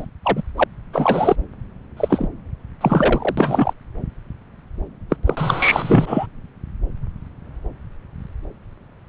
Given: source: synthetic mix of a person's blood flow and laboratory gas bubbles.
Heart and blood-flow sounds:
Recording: Doppler ultrasound of blood flow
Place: subclavian vein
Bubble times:
0.00-0.06 s: bubbles
0.23-0.43 s: bubbles
0.57-0.64 s: bubbles
0.93-1.36 s: bubbles
1.97-2.29 s: bubbles
2.81-3.73 s: bubbles
5.09-5.16 s: bubbles
5.25-6.26 s: bubbles
From the record:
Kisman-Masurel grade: 333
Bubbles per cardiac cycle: rolling drumbeat, 9 or more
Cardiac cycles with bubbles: 50 to 99%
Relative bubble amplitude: loud (0.450 to 0.775)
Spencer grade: 3 (all of the cardiac periods contain showers or single bubble signals, but not dominating or overriding the cardiac motion signals)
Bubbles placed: anywhere in the cardiac cycle

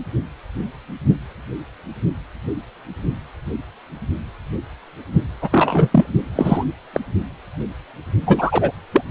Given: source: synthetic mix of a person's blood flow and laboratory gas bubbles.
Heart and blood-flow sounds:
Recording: Doppler ultrasound of blood flow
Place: precordium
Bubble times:
5.42-6.06 s: bubbles
6.35-6.65 s: bubbles
6.93-7.00 s: bubbles
8.27-8.71 s: bubbles
8.93-9.02 s: bubbles
From the record:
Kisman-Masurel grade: 223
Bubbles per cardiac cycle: several, 3 to 8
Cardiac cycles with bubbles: 10 to 50%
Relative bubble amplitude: loud (0.450 to 0.775)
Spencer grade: 2 (many but less than half of the cardiac periods contain bubble signals, singularly or in groups)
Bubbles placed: only in the low amplitude regions of the cardiac cycle

